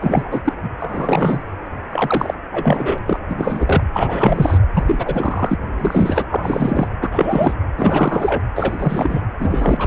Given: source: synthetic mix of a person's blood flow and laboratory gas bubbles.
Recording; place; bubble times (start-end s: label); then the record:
Doppler ultrasound of blood flow; precordium
0.00-0.41 s: bubbles
0.45-0.53 s: bubbles
0.62-0.71 s: bubbles
0.79-1.43 s: bubbles
1.90-2.34 s: bubbles
2.52-2.99 s: bubbles
3.06-3.20 s: bubbles
3.29-3.83 s: bubbles
3.93-4.58 s: bubbles
4.73-5.56 s: bubbles
5.78-6.26 s: bubbles
6.30-6.88 s: bubbles
7.01-7.54 s: bubbles
7.76-8.41 s: bubbles
8.55-9.22 s: bubbles
9.39-9.87 s: bubbles
From the record:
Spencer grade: 3 (all of the cardiac periods contain showers or single bubble signals, but not dominating or overriding the cardiac motion signals); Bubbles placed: anywhere in the cardiac cycle